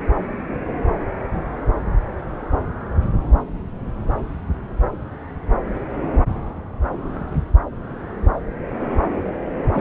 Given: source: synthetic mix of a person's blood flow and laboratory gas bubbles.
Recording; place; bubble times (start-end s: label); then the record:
Doppler ultrasound of blood flow; subclavian vein
9.74-9.81 s: bubbles
From the record:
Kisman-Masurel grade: 212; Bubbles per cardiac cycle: several, 3 to 8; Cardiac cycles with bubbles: 1 to 10%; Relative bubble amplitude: moderate (0.250 to 0.450); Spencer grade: 1 (occasional bubble signal discernible with the cardiac motion signal, with majority of cardiac periods free of bubbles); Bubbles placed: anywhere in the cardiac cycle